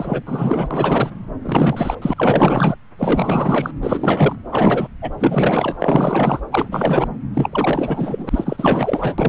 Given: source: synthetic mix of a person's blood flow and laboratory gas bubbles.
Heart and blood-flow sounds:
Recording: Doppler ultrasound of blood flow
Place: subclavian vein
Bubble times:
0.00-0.23 s: bubbles
0.26-1.10 s: bubbles
1.42-1.95 s: bubbles
2.02-2.14 s: bubbles
2.16-2.76 s: bubbles
2.98-3.71 s: bubbles
3.82-4.36 s: bubbles
4.52-4.88 s: bubbles
5.02-5.11 s: bubbles
5.20-5.77 s: bubbles
5.79-6.40 s: bubbles
6.51-6.69 s: bubbles
6.71-7.08 s: bubbles
7.33-9.15 s: bubbles
9.18-9.29 s: bubbles
From the record:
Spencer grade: 4 (maximum detectable bubble signal sounding continuously throughout systole and diastole of every cardiac period, and overriding the amplitude of the normal cardiac signals)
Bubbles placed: anywhere in the cardiac cycle

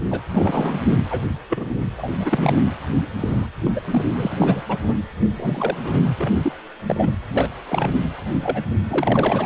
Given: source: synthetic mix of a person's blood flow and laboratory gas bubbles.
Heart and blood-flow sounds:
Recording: Doppler ultrasound of blood flow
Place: precordium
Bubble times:
0.11-0.22 s: bubbles
0.33-0.82 s: bubbles
1.10-1.22 s: bubbles
1.50-1.75 s: bubbles
1.97-2.11 s: bubbles
2.19-2.57 s: bubbles
3.19-3.46 s: bubbles
3.65-3.72 s: bubbles
3.75-3.81 s: bubbles
3.90-4.04 s: bubbles
4.17-4.62 s: bubbles
4.68-4.77 s: bubbles
4.81-4.93 s: bubbles
5.36-5.78 s: bubbles
5.82-6.01 s: bubbles
6.17-6.32 s: bubbles
6.42-6.52 s: bubbles
6.85-7.14 s: bubbles
7.32-7.50 s: bubbles
7.69-7.92 s: bubbles
8.41-8.62 s: bubbles
8.90-9.46 s: bubbles
From the record:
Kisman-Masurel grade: 242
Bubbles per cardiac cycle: several, 3 to 8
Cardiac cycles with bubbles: 100%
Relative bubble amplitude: moderate (0.250 to 0.450)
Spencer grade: 3 (all of the cardiac periods contain showers or single bubble signals, but not dominating or overriding the cardiac motion signals)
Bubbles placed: anywhere in the cardiac cycle

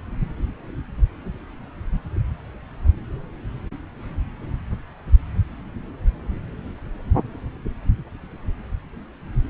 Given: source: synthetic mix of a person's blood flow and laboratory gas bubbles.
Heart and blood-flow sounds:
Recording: Doppler ultrasound of blood flow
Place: subclavian vein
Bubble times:
no bubbles
From the record:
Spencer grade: 0 (complete lack of bubble signals)

